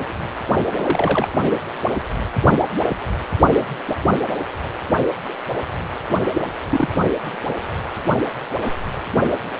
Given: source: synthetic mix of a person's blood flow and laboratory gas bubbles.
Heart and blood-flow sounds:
Doppler ultrasound of blood flow; precordium
0.78-1.28 s: bubbles
6.33-6.42 s: bubbles
6.71-6.88 s: bubbles
From the record:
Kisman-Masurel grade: 122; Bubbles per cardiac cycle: 1 to 2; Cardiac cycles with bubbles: 10 to 50%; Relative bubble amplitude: moderate (0.250 to 0.450); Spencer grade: 2 (many but less than half of the cardiac periods contain bubble signals, singularly or in groups); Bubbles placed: only in the low amplitude regions of the cardiac cycle

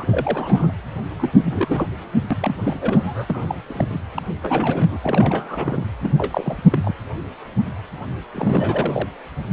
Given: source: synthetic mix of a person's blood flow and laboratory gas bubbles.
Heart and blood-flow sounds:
Doppler ultrasound of blood flow; precordium
0.00-0.77 s: bubbles
1.17-1.31 s: bubbles
1.37-1.43 s: bubbles
1.46-1.88 s: bubbles
2.30-2.55 s: bubbles
2.63-2.76 s: bubbles
2.81-3.24 s: bubbles
3.28-3.46 s: bubbles
3.48-3.55 s: bubbles
3.69-3.98 s: bubbles
4.14-4.22 s: bubbles
4.42-4.99 s: bubbles
5.03-5.86 s: bubbles
6.03-6.15 s: bubbles
6.18-6.61 s: bubbles
6.71-6.79 s: bubbles
6.82-6.95 s: bubbles
8.34-9.07 s: bubbles
From the record:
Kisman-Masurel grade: 332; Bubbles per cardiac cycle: rolling drumbeat, 9 or more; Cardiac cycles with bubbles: 50 to 99%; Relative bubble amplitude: moderate (0.250 to 0.450); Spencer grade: 3 (all of the cardiac periods contain showers or single bubble signals, but not dominating or overriding the cardiac motion signals); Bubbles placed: anywhere in the cardiac cycle

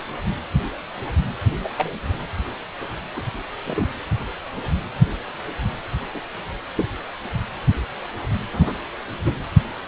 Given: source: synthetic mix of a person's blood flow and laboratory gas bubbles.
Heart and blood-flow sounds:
Doppler ultrasound of blood flow; precordium
1.59-1.67 s: bubbles
1.76-1.98 s: bubbles
3.16-3.23 s: bubbles
3.66-3.85 s: bubbles
6.14-6.21 s: bubbles
6.76-6.91 s: bubbles
8.52-8.73 s: bubbles
9.24-9.32 s: bubbles
From the record:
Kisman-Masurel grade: 122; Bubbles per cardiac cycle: 1 to 2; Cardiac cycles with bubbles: 10 to 50%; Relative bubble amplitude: moderate (0.250 to 0.450); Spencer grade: 2 (many but less than half of the cardiac periods contain bubble signals, singularly or in groups); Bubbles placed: anywhere in the cardiac cycle

